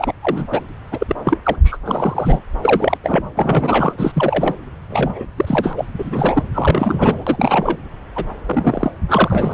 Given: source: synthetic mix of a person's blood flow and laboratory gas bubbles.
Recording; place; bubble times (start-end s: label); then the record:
Doppler ultrasound of blood flow; subclavian vein
0.00-0.14 s: bubbles
0.21-0.47 s: bubbles
0.51-0.61 s: bubbles
0.91-1.16 s: bubbles
1.24-1.38 s: bubbles
1.43-1.56 s: bubbles
1.64-1.77 s: bubbles
1.85-2.40 s: bubbles
2.62-2.98 s: bubbles
3.02-3.31 s: bubbles
3.35-3.94 s: bubbles
3.98-4.55 s: bubbles
4.89-5.25 s: bubbles
5.37-5.73 s: bubbles
5.76-5.85 s: bubbles
5.98-6.43 s: bubbles
6.54-7.76 s: bubbles
8.15-8.25 s: bubbles
8.46-8.91 s: bubbles
9.08-9.54 s: bubbles
From the record:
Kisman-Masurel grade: 343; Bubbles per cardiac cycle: rolling drumbeat, 9 or more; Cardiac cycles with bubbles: 100%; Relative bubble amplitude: loud (0.450 to 0.775); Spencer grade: 3 (all of the cardiac periods contain showers or single bubble signals, but not dominating or overriding the cardiac motion signals); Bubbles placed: anywhere in the cardiac cycle